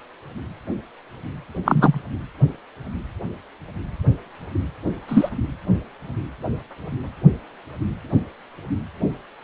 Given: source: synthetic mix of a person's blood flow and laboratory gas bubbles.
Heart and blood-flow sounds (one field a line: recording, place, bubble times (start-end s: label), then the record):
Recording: Doppler ultrasound of blood flow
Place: precordium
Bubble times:
1.65-1.99 s: bubbles
5.08-5.29 s: bubbles
From the record:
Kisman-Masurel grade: 123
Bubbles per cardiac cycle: 1 to 2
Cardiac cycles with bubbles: 10 to 50%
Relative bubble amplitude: loud (0.450 to 0.775)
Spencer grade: 2 (many but less than half of the cardiac periods contain bubble signals, singularly or in groups)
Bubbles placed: anywhere in the cardiac cycle